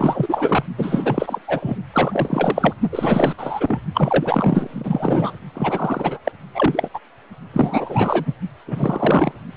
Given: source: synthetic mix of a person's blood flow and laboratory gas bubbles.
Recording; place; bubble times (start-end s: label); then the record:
Doppler ultrasound of blood flow; precordium
0.00-0.64 s: bubbles
0.78-1.39 s: bubbles
1.47-1.77 s: bubbles
1.93-2.73 s: bubbles
2.92-3.35 s: bubbles
3.38-3.78 s: bubbles
3.94-5.33 s: bubbles
5.54-6.19 s: bubbles
6.25-6.32 s: bubbles
6.55-6.90 s: bubbles
6.94-7.00 s: bubbles
7.53-8.34 s: bubbles
8.67-9.33 s: bubbles
From the record:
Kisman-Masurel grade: 444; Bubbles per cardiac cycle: continuous sound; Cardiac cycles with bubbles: 100%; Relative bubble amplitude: maximal (0.775 to 0.999); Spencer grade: 4 (maximum detectable bubble signal sounding continuously throughout systole and diastole of every cardiac period, and overriding the amplitude of the normal cardiac signals); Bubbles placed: only in the low amplitude regions of the cardiac cycle